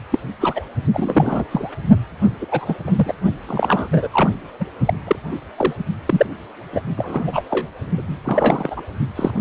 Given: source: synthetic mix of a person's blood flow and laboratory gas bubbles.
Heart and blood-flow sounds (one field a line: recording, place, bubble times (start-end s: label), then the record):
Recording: Doppler ultrasound of blood flow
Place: precordium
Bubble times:
0.11-0.19 s: bubbles
0.41-0.62 s: bubbles
0.93-1.44 s: bubbles
1.51-1.69 s: bubbles
2.41-2.46 s: bubbles
2.51-2.76 s: bubbles
2.87-2.91 s: bubbles
2.95-3.13 s: bubbles
3.47-4.30 s: bubbles
4.59-4.65 s: bubbles
4.86-4.94 s: bubbles
5.07-5.16 s: bubbles
5.57-5.74 s: bubbles
6.05-6.27 s: bubbles
6.73-6.81 s: bubbles
6.97-7.43 s: bubbles
7.50-7.67 s: bubbles
7.97-8.17 s: bubbles
8.24-8.83 s: bubbles
9.15-9.31 s: bubbles
From the record:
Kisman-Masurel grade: 242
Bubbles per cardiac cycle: several, 3 to 8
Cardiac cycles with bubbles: 100%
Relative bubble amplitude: moderate (0.250 to 0.450)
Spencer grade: 3 (all of the cardiac periods contain showers or single bubble signals, but not dominating or overriding the cardiac motion signals)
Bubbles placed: only in the low amplitude regions of the cardiac cycle